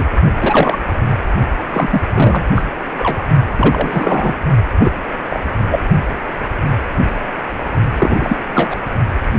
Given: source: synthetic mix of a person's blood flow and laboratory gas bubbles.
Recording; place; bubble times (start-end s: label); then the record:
Doppler ultrasound of blood flow; precordium
0.00-0.05 s: bubbles
0.40-0.78 s: bubbles
1.72-2.02 s: bubbles
2.13-2.45 s: bubbles
2.55-2.65 s: bubbles
2.98-3.23 s: bubbles
3.57-4.37 s: bubbles
4.79-4.92 s: bubbles
5.30-5.39 s: bubbles
5.70-5.80 s: bubbles
7.99-8.17 s: bubbles
8.21-8.37 s: bubbles
8.54-8.80 s: bubbles
From the record:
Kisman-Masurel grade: 233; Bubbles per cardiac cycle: several, 3 to 8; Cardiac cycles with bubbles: 50 to 99%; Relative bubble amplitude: loud (0.450 to 0.775); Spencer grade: 3 (all of the cardiac periods contain showers or single bubble signals, but not dominating or overriding the cardiac motion signals); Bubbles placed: only in the low amplitude regions of the cardiac cycle